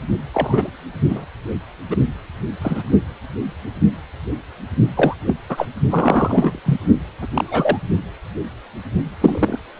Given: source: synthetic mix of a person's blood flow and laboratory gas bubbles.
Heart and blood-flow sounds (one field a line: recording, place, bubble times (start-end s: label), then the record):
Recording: Doppler ultrasound of blood flow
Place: precordium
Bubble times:
0.34-0.69 s: bubbles
1.08-1.25 s: bubbles
1.90-1.96 s: bubbles
2.61-2.83 s: bubbles
4.96-5.14 s: bubbles
5.26-5.38 s: bubbles
5.49-5.67 s: bubbles
5.89-6.60 s: bubbles
6.66-6.78 s: bubbles
7.21-7.27 s: bubbles
7.33-7.80 s: bubbles
9.21-9.60 s: bubbles
9.76-9.80 s: bubbles
From the record:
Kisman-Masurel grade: 233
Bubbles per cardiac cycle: several, 3 to 8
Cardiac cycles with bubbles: 50 to 99%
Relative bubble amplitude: loud (0.450 to 0.775)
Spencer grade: 3 (all of the cardiac periods contain showers or single bubble signals, but not dominating or overriding the cardiac motion signals)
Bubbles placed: only in the low amplitude regions of the cardiac cycle